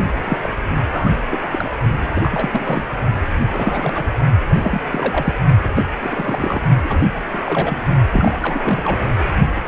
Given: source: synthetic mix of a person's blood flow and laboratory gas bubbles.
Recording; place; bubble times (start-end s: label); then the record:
Doppler ultrasound of blood flow; precordium
0.24-0.37 s: bubbles
0.42-0.50 s: bubbles
0.91-1.20 s: bubbles
1.31-1.48 s: bubbles
1.51-1.69 s: bubbles
2.15-2.84 s: bubbles
3.49-4.04 s: bubbles
4.50-4.81 s: bubbles
4.91-5.34 s: bubbles
5.63-5.71 s: bubbles
5.75-5.83 s: bubbles
6.00-6.62 s: bubbles
6.84-7.04 s: bubbles
7.33-7.78 s: bubbles
8.13-8.38 s: bubbles
8.41-8.98 s: bubbles
From the record:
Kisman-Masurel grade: 342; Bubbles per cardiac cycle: rolling drumbeat, 9 or more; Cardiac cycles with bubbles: 100%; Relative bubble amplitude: moderate (0.250 to 0.450); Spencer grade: 3 (all of the cardiac periods contain showers or single bubble signals, but not dominating or overriding the cardiac motion signals); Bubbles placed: only in the low amplitude regions of the cardiac cycle